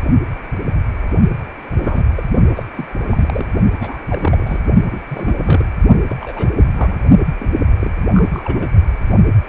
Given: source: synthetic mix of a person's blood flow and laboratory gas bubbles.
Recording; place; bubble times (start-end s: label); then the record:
Doppler ultrasound of blood flow; precordium
1.72-2.04 s: bubbles
2.17-2.23 s: bubbles
2.56-2.63 s: bubbles
2.75-2.87 s: bubbles
3.08-3.46 s: bubbles
3.79-4.03 s: bubbles
4.10-4.59 s: bubbles
4.91-5.00 s: bubbles
5.08-5.36 s: bubbles
5.42-5.65 s: bubbles
6.09-6.16 s: bubbles
6.21-6.53 s: bubbles
6.57-6.66 s: bubbles
6.75-7.00 s: bubbles
7.40-7.50 s: bubbles
7.80-7.91 s: bubbles
8.13-8.69 s: bubbles
From the record:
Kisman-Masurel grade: 232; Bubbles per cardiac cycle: several, 3 to 8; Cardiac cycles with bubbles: 50 to 99%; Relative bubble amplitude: moderate (0.250 to 0.450); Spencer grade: 3 (all of the cardiac periods contain showers or single bubble signals, but not dominating or overriding the cardiac motion signals); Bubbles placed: only in the low amplitude regions of the cardiac cycle